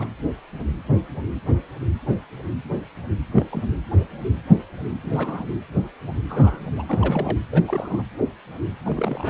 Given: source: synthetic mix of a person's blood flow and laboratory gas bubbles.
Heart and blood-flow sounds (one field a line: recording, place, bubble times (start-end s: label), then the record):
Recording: Doppler ultrasound of blood flow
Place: precordium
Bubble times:
0.00-0.07 s: bubbles
3.36-3.45 s: bubbles
3.51-3.62 s: bubbles
5.02-5.46 s: bubbles
6.29-6.61 s: bubbles
6.77-6.85 s: bubbles
6.88-7.38 s: bubbles
7.52-7.63 s: bubbles
7.67-8.03 s: bubbles
8.84-9.30 s: bubbles
From the record:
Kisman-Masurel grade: 221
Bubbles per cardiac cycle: several, 3 to 8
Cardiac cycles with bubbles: 10 to 50%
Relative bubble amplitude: barely perceptible (0.100 to 0.250)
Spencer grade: 2 (many but less than half of the cardiac periods contain bubble signals, singularly or in groups)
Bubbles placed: anywhere in the cardiac cycle